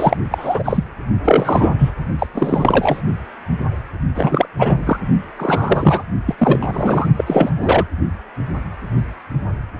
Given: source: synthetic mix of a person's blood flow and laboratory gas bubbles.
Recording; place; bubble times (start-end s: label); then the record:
Doppler ultrasound of blood flow; precordium
0.00-0.16 s: bubbles
0.30-0.84 s: bubbles
1.24-1.73 s: bubbles
1.78-1.91 s: bubbles
2.19-2.27 s: bubbles
2.34-3.02 s: bubbles
4.14-4.46 s: bubbles
4.58-4.83 s: bubbles
4.85-4.97 s: bubbles
5.38-6.03 s: bubbles
6.25-6.35 s: bubbles
6.38-7.08 s: bubbles
7.17-7.52 s: bubbles
7.59-7.87 s: bubbles
From the record:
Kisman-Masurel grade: 333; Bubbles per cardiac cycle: rolling drumbeat, 9 or more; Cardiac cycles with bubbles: 50 to 99%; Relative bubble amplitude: loud (0.450 to 0.775); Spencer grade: 3 (all of the cardiac periods contain showers or single bubble signals, but not dominating or overriding the cardiac motion signals); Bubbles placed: only in the low amplitude regions of the cardiac cycle